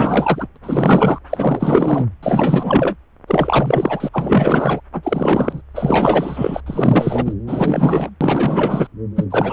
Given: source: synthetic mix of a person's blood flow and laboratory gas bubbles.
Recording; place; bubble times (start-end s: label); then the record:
Doppler ultrasound of blood flow; subclavian vein
0.00-0.48 s: bubbles
0.62-1.19 s: bubbles
1.30-2.06 s: bubbles
2.23-2.96 s: bubbles
3.27-4.09 s: bubbles
4.12-4.80 s: bubbles
4.92-5.62 s: bubbles
5.75-6.61 s: bubbles
6.66-7.34 s: bubbles
7.47-8.10 s: bubbles
8.21-8.87 s: bubbles
9.16-9.26 s: bubbles
9.30-9.53 s: bubbles
From the record:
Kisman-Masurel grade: 444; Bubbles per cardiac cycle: continuous sound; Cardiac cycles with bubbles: 100%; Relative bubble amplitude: maximal (0.775 to 0.999); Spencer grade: 4 (maximum detectable bubble signal sounding continuously throughout systole and diastole of every cardiac period, and overriding the amplitude of the normal cardiac signals); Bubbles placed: anywhere in the cardiac cycle